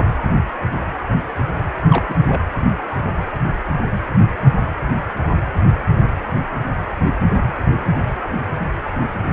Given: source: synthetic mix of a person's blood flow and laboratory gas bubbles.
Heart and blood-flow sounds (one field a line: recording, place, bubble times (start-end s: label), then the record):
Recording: Doppler ultrasound of blood flow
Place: precordium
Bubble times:
1.90-2.15 s: bubbles
2.27-2.42 s: bubbles
From the record:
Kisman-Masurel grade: 212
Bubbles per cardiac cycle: several, 3 to 8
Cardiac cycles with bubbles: 1 to 10%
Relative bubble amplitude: moderate (0.250 to 0.450)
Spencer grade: 1 (occasional bubble signal discernible with the cardiac motion signal, with majority of cardiac periods free of bubbles)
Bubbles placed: anywhere in the cardiac cycle